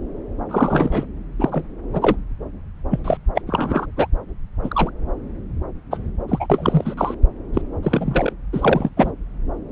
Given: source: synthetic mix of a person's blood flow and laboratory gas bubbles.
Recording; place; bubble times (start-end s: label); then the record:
Doppler ultrasound of blood flow; subclavian vein
0.51-1.05 s: bubbles
1.39-1.65 s: bubbles
1.93-2.16 s: bubbles
2.91-2.99 s: bubbles
3.04-3.17 s: bubbles
3.35-3.42 s: bubbles
3.47-3.86 s: bubbles
3.97-4.07 s: bubbles
4.63-4.90 s: bubbles
5.91-5.98 s: bubbles
6.28-6.46 s: bubbles
6.50-6.95 s: bubbles
6.97-7.15 s: bubbles
7.54-7.62 s: bubbles
7.83-8.33 s: bubbles
8.53-8.89 s: bubbles
8.96-9.12 s: bubbles
From the record:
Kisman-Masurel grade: 243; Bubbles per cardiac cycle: several, 3 to 8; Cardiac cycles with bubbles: 100%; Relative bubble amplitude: loud (0.450 to 0.775); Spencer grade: 3 (all of the cardiac periods contain showers or single bubble signals, but not dominating or overriding the cardiac motion signals); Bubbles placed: anywhere in the cardiac cycle